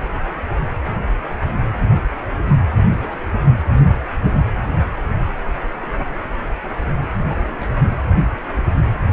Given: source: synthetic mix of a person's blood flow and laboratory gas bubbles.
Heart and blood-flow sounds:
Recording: Doppler ultrasound of blood flow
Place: precordium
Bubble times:
2.96-3.21 s: bubbles
5.82-6.06 s: bubbles
6.82-6.95 s: bubbles
7.29-7.54 s: bubbles
7.60-7.72 s: bubbles
8.16-8.29 s: bubbles
8.56-8.64 s: bubbles
From the record:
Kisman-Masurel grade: 121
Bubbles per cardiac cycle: 1 to 2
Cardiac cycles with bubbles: 10 to 50%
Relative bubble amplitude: barely perceptible (0.100 to 0.250)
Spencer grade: 2 (many but less than half of the cardiac periods contain bubble signals, singularly or in groups)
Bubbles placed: anywhere in the cardiac cycle

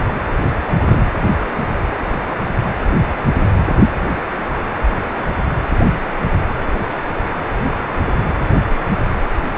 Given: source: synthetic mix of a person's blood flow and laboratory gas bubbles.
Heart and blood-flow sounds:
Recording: Doppler ultrasound of blood flow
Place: precordium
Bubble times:
0.66-0.73 s: bubbles
0.78-1.00 s: bubbles
From the record:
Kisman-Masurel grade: 212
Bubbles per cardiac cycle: several, 3 to 8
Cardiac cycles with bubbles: 1 to 10%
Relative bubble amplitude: moderate (0.250 to 0.450)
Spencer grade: 1 (occasional bubble signal discernible with the cardiac motion signal, with majority of cardiac periods free of bubbles)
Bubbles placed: anywhere in the cardiac cycle

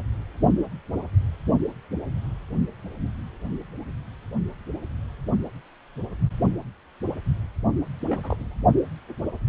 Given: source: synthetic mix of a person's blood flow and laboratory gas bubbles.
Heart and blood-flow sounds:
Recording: Doppler ultrasound of blood flow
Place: precordium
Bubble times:
8.07-8.37 s: bubbles
8.39-8.63 s: bubbles
From the record:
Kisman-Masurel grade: 211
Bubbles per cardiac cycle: several, 3 to 8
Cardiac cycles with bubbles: 1 to 10%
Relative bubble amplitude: barely perceptible (0.100 to 0.250)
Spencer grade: 1 (occasional bubble signal discernible with the cardiac motion signal, with majority of cardiac periods free of bubbles)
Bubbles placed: only in the low amplitude regions of the cardiac cycle

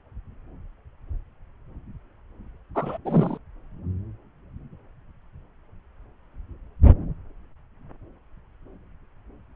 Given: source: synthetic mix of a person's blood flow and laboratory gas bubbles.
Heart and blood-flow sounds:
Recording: Doppler ultrasound of blood flow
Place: subclavian vein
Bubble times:
2.75-2.98 s: bubbles
3.05-3.38 s: bubbles
From the record:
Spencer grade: 1 (occasional bubble signal discernible with the cardiac motion signal, with majority of cardiac periods free of bubbles)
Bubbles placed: anywhere in the cardiac cycle

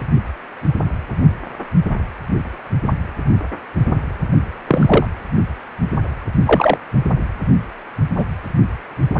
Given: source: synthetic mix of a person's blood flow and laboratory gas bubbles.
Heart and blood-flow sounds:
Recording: Doppler ultrasound of blood flow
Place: precordium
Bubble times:
4.67-5.06 s: bubbles
6.46-6.77 s: bubbles
8.15-8.25 s: bubbles
From the record:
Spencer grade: 2 (many but less than half of the cardiac periods contain bubble signals, singularly or in groups)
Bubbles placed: anywhere in the cardiac cycle

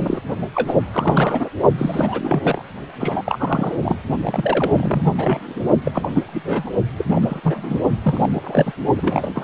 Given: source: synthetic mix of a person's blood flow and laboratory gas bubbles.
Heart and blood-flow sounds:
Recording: Doppler ultrasound of blood flow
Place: precordium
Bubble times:
0.00-0.20 s: bubbles
0.54-0.76 s: bubbles
0.92-1.49 s: bubbles
1.77-2.62 s: bubbles
3.00-3.76 s: bubbles
3.82-3.97 s: bubbles
4.24-5.15 s: bubbles
5.17-5.63 s: bubbles
5.84-6.08 s: bubbles
6.13-6.24 s: bubbles
6.27-6.71 s: bubbles
6.98-7.81 s: bubbles
8.02-8.29 s: bubbles
8.32-8.72 s: bubbles
8.96-9.44 s: bubbles
From the record:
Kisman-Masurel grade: 332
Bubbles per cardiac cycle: rolling drumbeat, 9 or more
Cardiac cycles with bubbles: 50 to 99%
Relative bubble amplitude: moderate (0.250 to 0.450)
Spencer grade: 3 (all of the cardiac periods contain showers or single bubble signals, but not dominating or overriding the cardiac motion signals)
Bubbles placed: only in the low amplitude regions of the cardiac cycle

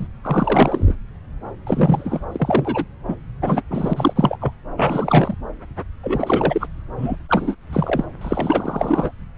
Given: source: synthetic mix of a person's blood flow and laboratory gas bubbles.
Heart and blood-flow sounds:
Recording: Doppler ultrasound of blood flow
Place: subclavian vein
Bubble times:
0.00-0.07 s: bubbles
0.23-0.95 s: bubbles
1.66-2.26 s: bubbles
2.32-2.85 s: bubbles
3.07-3.16 s: bubbles
3.42-3.63 s: bubbles
3.69-3.94 s: bubbles
3.96-4.38 s: bubbles
4.41-4.53 s: bubbles
4.77-5.35 s: bubbles
6.03-6.67 s: bubbles
6.98-7.17 s: bubbles
7.29-7.55 s: bubbles
7.72-8.04 s: bubbles
8.21-9.11 s: bubbles
From the record:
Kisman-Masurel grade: 343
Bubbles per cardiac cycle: rolling drumbeat, 9 or more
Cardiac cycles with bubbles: 100%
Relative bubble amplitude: loud (0.450 to 0.775)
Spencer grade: 3 (all of the cardiac periods contain showers or single bubble signals, but not dominating or overriding the cardiac motion signals)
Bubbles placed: anywhere in the cardiac cycle

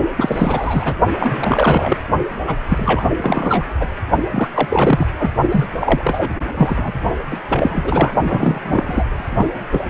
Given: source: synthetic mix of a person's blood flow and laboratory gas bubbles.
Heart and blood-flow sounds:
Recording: Doppler ultrasound of blood flow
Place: precordium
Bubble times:
0.17-0.94 s: bubbles
1.19-1.98 s: bubbles
2.47-2.56 s: bubbles
2.69-3.05 s: bubbles
3.17-3.65 s: bubbles
3.80-3.88 s: bubbles
4.31-4.50 s: bubbles
4.54-5.09 s: bubbles
5.18-5.31 s: bubbles
5.50-5.67 s: bubbles
5.80-6.29 s: bubbles
6.54-6.93 s: bubbles
7.31-7.42 s: bubbles
7.49-8.13 s: bubbles
8.22-9.05 s: bubbles
9.14-9.48 s: bubbles
9.71-9.85 s: bubbles
From the record:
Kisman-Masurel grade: 342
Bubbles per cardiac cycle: rolling drumbeat, 9 or more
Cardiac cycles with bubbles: 100%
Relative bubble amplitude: moderate (0.250 to 0.450)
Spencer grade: 3 (all of the cardiac periods contain showers or single bubble signals, but not dominating or overriding the cardiac motion signals)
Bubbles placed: only in the low amplitude regions of the cardiac cycle

